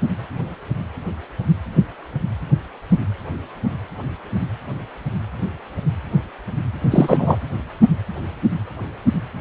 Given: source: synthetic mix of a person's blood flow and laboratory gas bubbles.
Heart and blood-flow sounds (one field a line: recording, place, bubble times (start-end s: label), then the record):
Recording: Doppler ultrasound of blood flow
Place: precordium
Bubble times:
6.91-7.38 s: bubbles
From the record:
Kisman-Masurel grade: 213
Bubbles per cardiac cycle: several, 3 to 8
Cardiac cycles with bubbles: 1 to 10%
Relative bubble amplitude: loud (0.450 to 0.775)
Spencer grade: 1 (occasional bubble signal discernible with the cardiac motion signal, with majority of cardiac periods free of bubbles)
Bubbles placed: anywhere in the cardiac cycle